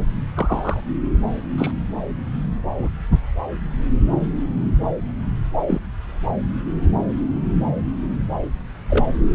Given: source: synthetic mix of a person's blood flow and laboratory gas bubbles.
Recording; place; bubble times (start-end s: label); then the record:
Doppler ultrasound of blood flow; subclavian vein
0.35-0.80 s: bubbles
1.57-1.71 s: bubbles
2.77-2.89 s: bubbles
5.67-5.81 s: bubbles
8.86-9.15 s: bubbles
From the record:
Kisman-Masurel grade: 123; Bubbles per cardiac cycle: 1 to 2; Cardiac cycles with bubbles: 10 to 50%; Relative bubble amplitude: loud (0.450 to 0.775); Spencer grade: 2 (many but less than half of the cardiac periods contain bubble signals, singularly or in groups); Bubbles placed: anywhere in the cardiac cycle